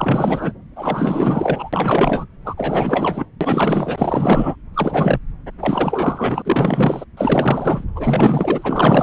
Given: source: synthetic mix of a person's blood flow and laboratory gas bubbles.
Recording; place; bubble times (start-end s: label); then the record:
Doppler ultrasound of blood flow; subclavian vein
0.00-0.53 s: bubbles
0.76-1.70 s: bubbles
1.72-2.25 s: bubbles
2.45-2.54 s: bubbles
2.57-3.25 s: bubbles
3.41-4.56 s: bubbles
4.74-5.19 s: bubbles
5.60-6.42 s: bubbles
6.45-7.04 s: bubbles
7.17-7.84 s: bubbles
7.95-9.03 s: bubbles
From the record:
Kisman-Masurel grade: 444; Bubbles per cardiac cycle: continuous sound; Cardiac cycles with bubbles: 100%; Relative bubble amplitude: maximal (0.775 to 0.999); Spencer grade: 4 (maximum detectable bubble signal sounding continuously throughout systole and diastole of every cardiac period, and overriding the amplitude of the normal cardiac signals); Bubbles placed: anywhere in the cardiac cycle